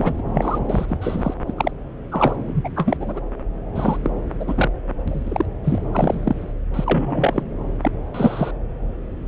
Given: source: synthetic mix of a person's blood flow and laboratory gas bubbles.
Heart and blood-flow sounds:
Doppler ultrasound of blood flow; subclavian vein
0.00-0.22 s: bubbles
0.32-0.59 s: bubbles
0.69-0.85 s: bubbles
0.89-0.97 s: bubbles
1.01-1.34 s: bubbles
1.47-1.54 s: bubbles
1.56-1.71 s: bubbles
2.11-2.36 s: bubbles
2.46-2.69 s: bubbles
2.75-2.97 s: bubbles
3.00-3.21 s: bubbles
3.75-3.97 s: bubbles
4.04-4.10 s: bubbles
4.39-4.45 s: bubbles
4.47-4.69 s: bubbles
5.08-5.46 s: bubbles
5.64-5.82 s: bubbles
5.93-6.51 s: bubbles
6.74-7.43 s: bubbles
7.82-7.91 s: bubbles
8.14-8.51 s: bubbles
From the record:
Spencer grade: 3 (all of the cardiac periods contain showers or single bubble signals, but not dominating or overriding the cardiac motion signals); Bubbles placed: anywhere in the cardiac cycle

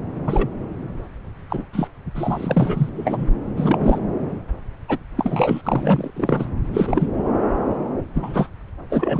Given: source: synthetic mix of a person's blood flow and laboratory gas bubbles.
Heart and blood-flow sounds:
Doppler ultrasound of blood flow; subclavian vein
0.26-0.48 s: bubbles
1.49-1.63 s: bubbles
1.73-1.88 s: bubbles
2.15-2.90 s: bubbles
2.96-3.29 s: bubbles
3.56-3.99 s: bubbles
4.88-4.98 s: bubbles
5.16-6.10 s: bubbles
6.16-6.46 s: bubbles
6.73-7.09 s: bubbles
8.13-8.49 s: bubbles
8.90-9.20 s: bubbles
From the record:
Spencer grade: 3 (all of the cardiac periods contain showers or single bubble signals, but not dominating or overriding the cardiac motion signals); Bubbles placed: anywhere in the cardiac cycle

